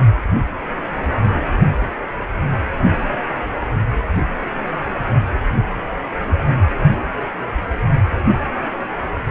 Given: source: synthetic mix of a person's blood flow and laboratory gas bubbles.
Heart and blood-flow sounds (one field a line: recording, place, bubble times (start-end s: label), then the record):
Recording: Doppler ultrasound of blood flow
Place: precordium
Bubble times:
no bubbles
From the record:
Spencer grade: 0 (complete lack of bubble signals)